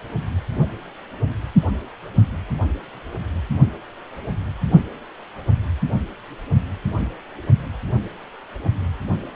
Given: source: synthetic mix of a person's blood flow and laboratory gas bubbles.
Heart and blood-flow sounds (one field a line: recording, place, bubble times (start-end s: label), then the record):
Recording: Doppler ultrasound of blood flow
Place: precordium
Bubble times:
no bubbles
From the record:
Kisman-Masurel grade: 000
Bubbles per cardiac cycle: 0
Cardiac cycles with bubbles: 0%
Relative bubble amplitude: no bubbles discernible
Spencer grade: 0 (complete lack of bubble signals)